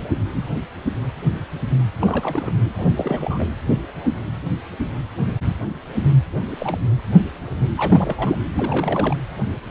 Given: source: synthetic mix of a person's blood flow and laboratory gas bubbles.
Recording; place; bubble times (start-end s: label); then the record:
Doppler ultrasound of blood flow; precordium
2.01-2.52 s: bubbles
2.78-2.85 s: bubbles
2.96-3.50 s: bubbles
6.36-6.56 s: bubbles
6.58-6.78 s: bubbles
7.77-8.40 s: bubbles
8.54-9.16 s: bubbles
From the record:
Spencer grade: 2 (many but less than half of the cardiac periods contain bubble signals, singularly or in groups); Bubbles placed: anywhere in the cardiac cycle